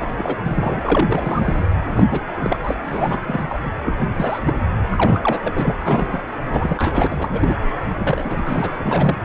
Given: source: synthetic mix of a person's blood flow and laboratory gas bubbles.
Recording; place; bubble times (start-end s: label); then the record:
Doppler ultrasound of blood flow; precordium
0.01-0.07 s: bubbles
0.18-0.37 s: bubbles
0.43-1.64 s: bubbles
1.91-2.06 s: bubbles
2.10-2.23 s: bubbles
2.25-2.75 s: bubbles
2.84-3.18 s: bubbles
3.27-3.45 s: bubbles
3.49-3.58 s: bubbles
3.65-3.71 s: bubbles
3.85-3.93 s: bubbles
3.98-4.08 s: bubbles
4.17-4.39 s: bubbles
4.44-4.55 s: bubbles
4.90-5.39 s: bubbles
5.44-5.76 s: bubbles
5.86-6.19 s: bubbles
6.47-7.07 s: bubbles
7.10-7.55 s: bubbles
7.98-8.71 s: bubbles
8.74-9.17 s: bubbles
From the record:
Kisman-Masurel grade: 342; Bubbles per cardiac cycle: rolling drumbeat, 9 or more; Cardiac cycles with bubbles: 100%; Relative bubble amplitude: moderate (0.250 to 0.450); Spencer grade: 3 (all of the cardiac periods contain showers or single bubble signals, but not dominating or overriding the cardiac motion signals); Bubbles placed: anywhere in the cardiac cycle